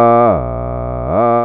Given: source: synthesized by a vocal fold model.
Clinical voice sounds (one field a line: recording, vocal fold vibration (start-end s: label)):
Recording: sustained vowel that changes in the middle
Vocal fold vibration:
0.00-0.24 s: 118.0 Hz, open quotient 0.30
0.44-1.04 s: 60.8 Hz, open quotient 0.46
1.24-1.45 s: 118.0 Hz, open quotient 0.30